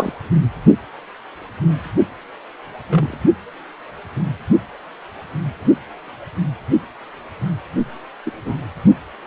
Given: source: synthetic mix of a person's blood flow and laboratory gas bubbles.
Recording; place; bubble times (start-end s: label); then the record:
Doppler ultrasound of blood flow; precordium
0.00-0.12 s: bubbles
2.91-3.16 s: bubbles
8.24-8.67 s: bubbles
From the record:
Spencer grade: 2 (many but less than half of the cardiac periods contain bubble signals, singularly or in groups); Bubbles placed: only in the low amplitude regions of the cardiac cycle